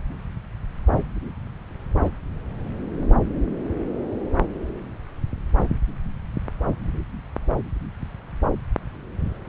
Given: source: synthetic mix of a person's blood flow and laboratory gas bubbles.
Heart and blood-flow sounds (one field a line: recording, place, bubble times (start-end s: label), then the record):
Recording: Doppler ultrasound of blood flow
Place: subclavian vein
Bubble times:
2.04-2.08 s: bubbles
From the record:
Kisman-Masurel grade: 112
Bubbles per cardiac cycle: 1 to 2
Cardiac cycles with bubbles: 1 to 10%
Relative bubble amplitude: moderate (0.250 to 0.450)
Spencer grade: 1 (occasional bubble signal discernible with the cardiac motion signal, with majority of cardiac periods free of bubbles)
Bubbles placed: anywhere in the cardiac cycle